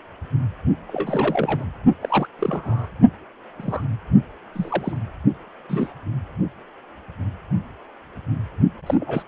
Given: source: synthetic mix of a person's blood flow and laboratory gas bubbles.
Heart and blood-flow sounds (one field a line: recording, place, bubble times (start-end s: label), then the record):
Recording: Doppler ultrasound of blood flow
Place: precordium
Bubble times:
0.87-1.65 s: bubbles
2.01-2.28 s: bubbles
2.39-2.88 s: bubbles
3.57-3.83 s: bubbles
4.54-4.96 s: bubbles
5.69-5.93 s: bubbles
8.86-8.95 s: bubbles
9.00-9.23 s: bubbles
From the record:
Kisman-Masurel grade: 232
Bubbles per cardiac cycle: several, 3 to 8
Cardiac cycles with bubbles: 50 to 99%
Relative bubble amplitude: moderate (0.250 to 0.450)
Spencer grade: 3 (all of the cardiac periods contain showers or single bubble signals, but not dominating or overriding the cardiac motion signals)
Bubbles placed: only in the low amplitude regions of the cardiac cycle